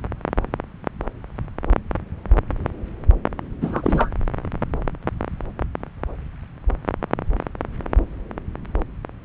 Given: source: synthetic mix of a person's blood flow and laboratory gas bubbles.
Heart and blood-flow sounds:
Doppler ultrasound of blood flow; subclavian vein
3.61-4.11 s: bubbles
From the record:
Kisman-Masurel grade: 223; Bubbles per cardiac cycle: several, 3 to 8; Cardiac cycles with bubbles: 10 to 50%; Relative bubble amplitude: loud (0.450 to 0.775); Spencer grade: 2 (many but less than half of the cardiac periods contain bubble signals, singularly or in groups); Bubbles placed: anywhere in the cardiac cycle

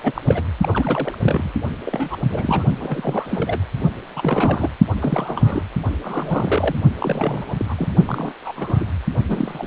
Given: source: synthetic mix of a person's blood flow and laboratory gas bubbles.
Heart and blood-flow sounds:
Doppler ultrasound of blood flow; precordium
0.03-0.22 s: bubbles
0.26-0.42 s: bubbles
0.60-1.51 s: bubbles
1.85-2.16 s: bubbles
2.22-2.65 s: bubbles
2.81-3.60 s: bubbles
4.17-4.70 s: bubbles
5.01-5.62 s: bubbles
6.02-6.75 s: bubbles
7.00-7.55 s: bubbles
7.59-7.66 s: bubbles
7.68-7.75 s: bubbles
7.78-7.94 s: bubbles
8.04-8.32 s: bubbles
8.40-8.88 s: bubbles
9.28-9.67 s: bubbles
From the record:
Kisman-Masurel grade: 342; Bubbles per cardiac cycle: rolling drumbeat, 9 or more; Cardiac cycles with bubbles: 100%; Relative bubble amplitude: moderate (0.250 to 0.450); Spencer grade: 3 (all of the cardiac periods contain showers or single bubble signals, but not dominating or overriding the cardiac motion signals); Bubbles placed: only in the low amplitude regions of the cardiac cycle

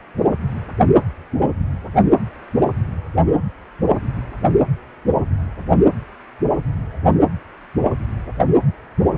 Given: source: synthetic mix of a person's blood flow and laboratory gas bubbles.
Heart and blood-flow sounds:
Doppler ultrasound of blood flow; precordium
no bubbles
From the record:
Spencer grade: 0 (complete lack of bubble signals)

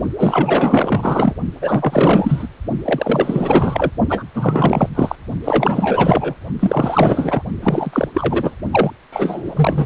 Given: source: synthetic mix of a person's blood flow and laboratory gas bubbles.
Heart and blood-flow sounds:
Doppler ultrasound of blood flow; precordium
0.16-1.34 s: bubbles
1.62-2.48 s: bubbles
2.84-3.90 s: bubbles
4.09-4.23 s: bubbles
4.34-4.89 s: bubbles
4.95-5.16 s: bubbles
5.44-6.34 s: bubbles
6.59-7.43 s: bubbles
7.61-8.08 s: bubbles
8.14-8.57 s: bubbles
8.71-8.92 s: bubbles
9.12-9.86 s: bubbles
From the record:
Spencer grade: 4 (maximum detectable bubble signal sounding continuously throughout systole and diastole of every cardiac period, and overriding the amplitude of the normal cardiac signals); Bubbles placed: only in the low amplitude regions of the cardiac cycle

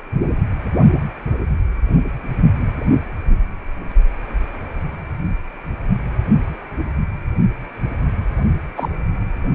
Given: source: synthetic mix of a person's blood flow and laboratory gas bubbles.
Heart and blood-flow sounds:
Doppler ultrasound of blood flow; precordium
8.77-8.89 s: bubbles
From the record:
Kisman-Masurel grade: 123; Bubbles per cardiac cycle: 1 to 2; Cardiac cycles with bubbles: 10 to 50%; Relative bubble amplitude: loud (0.450 to 0.775); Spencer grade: 2 (many but less than half of the cardiac periods contain bubble signals, singularly or in groups); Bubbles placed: only in the low amplitude regions of the cardiac cycle

